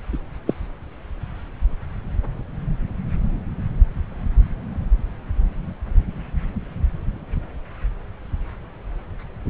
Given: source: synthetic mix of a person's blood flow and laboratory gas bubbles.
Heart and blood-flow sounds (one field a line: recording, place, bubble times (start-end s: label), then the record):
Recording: Doppler ultrasound of blood flow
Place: subclavian vein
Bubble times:
0.46-0.54 s: bubbles
From the record:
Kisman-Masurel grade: 113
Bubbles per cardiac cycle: 1 to 2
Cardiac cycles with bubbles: 1 to 10%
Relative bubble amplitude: loud (0.450 to 0.775)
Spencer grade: 1 (occasional bubble signal discernible with the cardiac motion signal, with majority of cardiac periods free of bubbles)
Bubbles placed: anywhere in the cardiac cycle